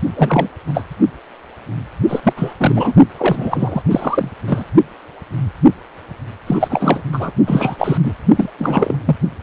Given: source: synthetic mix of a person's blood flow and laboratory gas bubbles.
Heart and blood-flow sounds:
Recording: Doppler ultrasound of blood flow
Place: precordium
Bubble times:
0.16-0.48 s: bubbles
0.66-0.84 s: bubbles
2.08-2.21 s: bubbles
2.23-2.33 s: bubbles
2.36-2.54 s: bubbles
2.58-2.93 s: bubbles
3.17-3.82 s: bubbles
3.90-4.30 s: bubbles
4.47-4.64 s: bubbles
6.46-7.02 s: bubbles
7.12-7.31 s: bubbles
7.47-7.97 s: bubbles
8.04-8.14 s: bubbles
8.36-8.49 s: bubbles
8.58-8.97 s: bubbles
9.05-9.16 s: bubbles
From the record:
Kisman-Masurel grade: 333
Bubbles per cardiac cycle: rolling drumbeat, 9 or more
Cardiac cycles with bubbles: 50 to 99%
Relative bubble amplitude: loud (0.450 to 0.775)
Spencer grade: 3 (all of the cardiac periods contain showers or single bubble signals, but not dominating or overriding the cardiac motion signals)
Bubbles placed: only in the low amplitude regions of the cardiac cycle

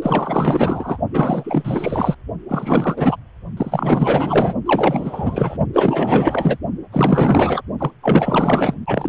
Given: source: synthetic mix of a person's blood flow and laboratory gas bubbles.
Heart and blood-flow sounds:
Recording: Doppler ultrasound of blood flow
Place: precordium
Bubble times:
0.01-0.98 s: bubbles
1.13-2.15 s: bubbles
2.49-3.16 s: bubbles
3.57-4.54 s: bubbles
4.66-5.58 s: bubbles
5.73-6.57 s: bubbles
6.92-7.61 s: bubbles
7.78-7.91 s: bubbles
8.02-8.74 s: bubbles
8.86-9.09 s: bubbles
From the record:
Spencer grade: 4 (maximum detectable bubble signal sounding continuously throughout systole and diastole of every cardiac period, and overriding the amplitude of the normal cardiac signals)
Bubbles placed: only in the low amplitude regions of the cardiac cycle

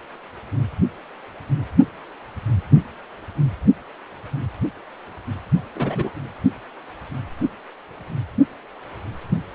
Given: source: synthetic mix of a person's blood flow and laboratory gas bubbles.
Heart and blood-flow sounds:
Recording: Doppler ultrasound of blood flow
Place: precordium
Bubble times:
5.75-6.10 s: bubbles
From the record:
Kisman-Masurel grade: 112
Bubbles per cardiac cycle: 1 to 2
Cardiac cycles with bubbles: 1 to 10%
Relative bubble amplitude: moderate (0.250 to 0.450)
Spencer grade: 1 (occasional bubble signal discernible with the cardiac motion signal, with majority of cardiac periods free of bubbles)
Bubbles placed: only in the low amplitude regions of the cardiac cycle

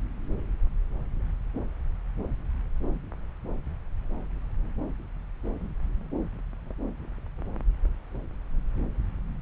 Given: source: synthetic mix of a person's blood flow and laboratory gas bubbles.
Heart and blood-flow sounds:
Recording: Doppler ultrasound of blood flow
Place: subclavian vein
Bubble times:
no bubbles
From the record:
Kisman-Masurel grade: 000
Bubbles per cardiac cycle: 0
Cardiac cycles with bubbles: 0%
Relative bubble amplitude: no bubbles discernible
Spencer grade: 0 (complete lack of bubble signals)

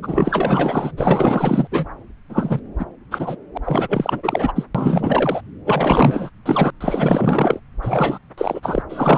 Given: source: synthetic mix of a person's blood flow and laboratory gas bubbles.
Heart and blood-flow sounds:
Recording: Doppler ultrasound of blood flow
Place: subclavian vein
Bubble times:
0.03-0.92 s: bubbles
0.97-1.67 s: bubbles
1.71-1.85 s: bubbles
2.29-2.60 s: bubbles
2.79-2.85 s: bubbles
3.11-3.35 s: bubbles
3.54-3.58 s: bubbles
3.63-4.52 s: bubbles
4.55-4.65 s: bubbles
4.75-5.42 s: bubbles
5.64-6.30 s: bubbles
6.46-6.71 s: bubbles
6.80-7.60 s: bubbles
7.82-8.19 s: bubbles
8.38-8.82 s: bubbles
8.89-9.18 s: bubbles
From the record:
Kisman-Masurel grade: 444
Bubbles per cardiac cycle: continuous sound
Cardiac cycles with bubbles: 100%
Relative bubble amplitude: maximal (0.775 to 0.999)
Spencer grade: 4 (maximum detectable bubble signal sounding continuously throughout systole and diastole of every cardiac period, and overriding the amplitude of the normal cardiac signals)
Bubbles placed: anywhere in the cardiac cycle

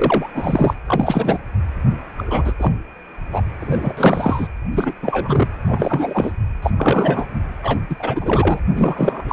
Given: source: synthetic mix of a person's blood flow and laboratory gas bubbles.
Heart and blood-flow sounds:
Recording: Doppler ultrasound of blood flow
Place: precordium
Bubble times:
0.00-0.28 s: bubbles
0.34-0.74 s: bubbles
0.87-1.38 s: bubbles
2.18-2.54 s: bubbles
2.59-2.73 s: bubbles
3.33-3.42 s: bubbles
3.60-3.94 s: bubbles
3.97-4.48 s: bubbles
4.71-4.94 s: bubbles
5.02-5.47 s: bubbles
5.69-6.32 s: bubbles
6.62-6.71 s: bubbles
6.78-7.26 s: bubbles
7.62-7.80 s: bubbles
7.89-7.96 s: bubbles
7.99-8.60 s: bubbles
8.75-9.22 s: bubbles
9.28-9.33 s: bubbles
From the record:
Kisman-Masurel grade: 343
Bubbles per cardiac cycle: rolling drumbeat, 9 or more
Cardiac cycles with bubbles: 100%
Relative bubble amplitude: loud (0.450 to 0.775)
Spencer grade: 3 (all of the cardiac periods contain showers or single bubble signals, but not dominating or overriding the cardiac motion signals)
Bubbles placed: anywhere in the cardiac cycle

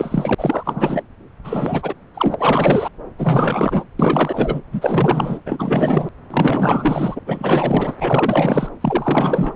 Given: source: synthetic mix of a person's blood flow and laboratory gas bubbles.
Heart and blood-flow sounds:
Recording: Doppler ultrasound of blood flow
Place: subclavian vein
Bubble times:
0.00-0.34 s: bubbles
0.38-1.03 s: bubbles
1.44-1.94 s: bubbles
2.14-2.36 s: bubbles
2.39-2.89 s: bubbles
3.18-3.84 s: bubbles
3.99-4.60 s: bubbles
4.71-5.41 s: bubbles
5.46-6.10 s: bubbles
6.30-7.19 s: bubbles
7.26-7.96 s: bubbles
8.00-8.69 s: bubbles
8.81-9.54 s: bubbles
From the record:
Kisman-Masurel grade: 444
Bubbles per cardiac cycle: continuous sound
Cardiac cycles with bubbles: 100%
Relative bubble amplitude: maximal (0.775 to 0.999)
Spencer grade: 4 (maximum detectable bubble signal sounding continuously throughout systole and diastole of every cardiac period, and overriding the amplitude of the normal cardiac signals)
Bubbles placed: anywhere in the cardiac cycle

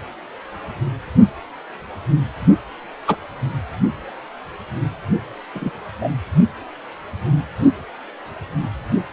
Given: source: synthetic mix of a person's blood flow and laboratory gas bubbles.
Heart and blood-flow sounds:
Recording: Doppler ultrasound of blood flow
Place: precordium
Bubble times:
3.07-3.16 s: bubbles
5.55-5.71 s: bubbles
6.00-6.09 s: bubbles
From the record:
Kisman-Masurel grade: 123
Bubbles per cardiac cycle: 1 to 2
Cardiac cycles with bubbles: 10 to 50%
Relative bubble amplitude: loud (0.450 to 0.775)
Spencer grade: 2 (many but less than half of the cardiac periods contain bubble signals, singularly or in groups)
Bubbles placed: anywhere in the cardiac cycle

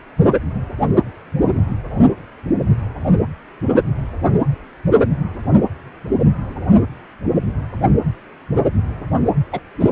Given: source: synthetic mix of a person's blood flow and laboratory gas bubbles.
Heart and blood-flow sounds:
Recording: Doppler ultrasound of blood flow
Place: precordium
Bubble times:
9.52-9.60 s: bubbles
9.80-9.89 s: bubbles
From the record:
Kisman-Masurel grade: 113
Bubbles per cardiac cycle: 1 to 2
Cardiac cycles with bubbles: 1 to 10%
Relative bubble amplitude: loud (0.450 to 0.775)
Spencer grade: 1 (occasional bubble signal discernible with the cardiac motion signal, with majority of cardiac periods free of bubbles)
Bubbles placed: anywhere in the cardiac cycle

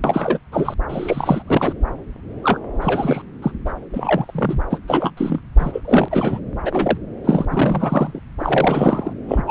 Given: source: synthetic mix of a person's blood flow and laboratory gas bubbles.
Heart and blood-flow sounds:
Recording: Doppler ultrasound of blood flow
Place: subclavian vein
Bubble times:
0.03-0.39 s: bubbles
0.51-0.74 s: bubbles
0.89-1.43 s: bubbles
1.46-1.73 s: bubbles
2.43-2.60 s: bubbles
2.81-3.22 s: bubbles
3.42-3.52 s: bubbles
3.65-3.73 s: bubbles
3.94-4.62 s: bubbles
4.70-4.79 s: bubbles
4.87-5.12 s: bubbles
5.17-5.42 s: bubbles
5.58-6.08 s: bubbles
6.11-6.39 s: bubbles
6.65-6.97 s: bubbles
7.24-7.45 s: bubbles
7.50-8.20 s: bubbles
8.39-9.13 s: bubbles
9.28-9.44 s: bubbles
9.46-9.51 s: bubbles
From the record:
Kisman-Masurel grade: 343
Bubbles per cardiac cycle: rolling drumbeat, 9 or more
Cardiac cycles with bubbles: 100%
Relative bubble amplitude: loud (0.450 to 0.775)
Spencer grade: 3 (all of the cardiac periods contain showers or single bubble signals, but not dominating or overriding the cardiac motion signals)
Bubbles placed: anywhere in the cardiac cycle

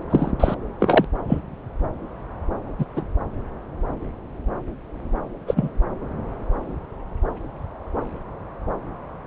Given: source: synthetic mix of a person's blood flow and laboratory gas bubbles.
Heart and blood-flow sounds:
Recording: Doppler ultrasound of blood flow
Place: subclavian vein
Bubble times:
0.10-0.31 s: bubbles
0.39-0.54 s: bubbles
0.79-1.04 s: bubbles
1.27-1.41 s: bubbles
2.78-2.85 s: bubbles
2.96-3.02 s: bubbles
5.47-5.69 s: bubbles
From the record:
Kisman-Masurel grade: 123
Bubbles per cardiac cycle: 1 to 2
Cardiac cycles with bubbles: 10 to 50%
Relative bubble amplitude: loud (0.450 to 0.775)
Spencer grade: 2 (many but less than half of the cardiac periods contain bubble signals, singularly or in groups)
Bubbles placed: anywhere in the cardiac cycle

